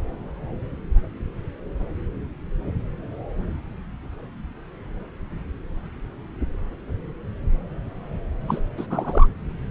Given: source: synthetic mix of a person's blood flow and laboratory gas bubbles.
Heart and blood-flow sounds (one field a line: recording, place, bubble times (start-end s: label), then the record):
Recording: Doppler ultrasound of blood flow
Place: subclavian vein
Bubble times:
8.47-8.60 s: bubbles
8.77-8.87 s: bubbles
8.90-9.27 s: bubbles
From the record:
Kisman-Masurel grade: 212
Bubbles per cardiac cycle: several, 3 to 8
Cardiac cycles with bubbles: 1 to 10%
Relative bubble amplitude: moderate (0.250 to 0.450)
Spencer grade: 1 (occasional bubble signal discernible with the cardiac motion signal, with majority of cardiac periods free of bubbles)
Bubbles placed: anywhere in the cardiac cycle